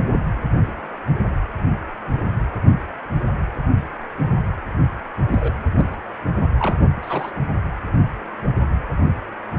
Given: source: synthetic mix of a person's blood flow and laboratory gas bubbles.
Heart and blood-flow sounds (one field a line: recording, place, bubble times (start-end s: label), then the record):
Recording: Doppler ultrasound of blood flow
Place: precordium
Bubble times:
5.30-5.52 s: bubbles
5.77-5.96 s: bubbles
6.57-6.75 s: bubbles
7.02-7.31 s: bubbles
From the record:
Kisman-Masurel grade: 222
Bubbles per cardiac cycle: several, 3 to 8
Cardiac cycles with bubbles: 10 to 50%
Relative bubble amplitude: moderate (0.250 to 0.450)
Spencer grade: 2 (many but less than half of the cardiac periods contain bubble signals, singularly or in groups)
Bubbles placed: anywhere in the cardiac cycle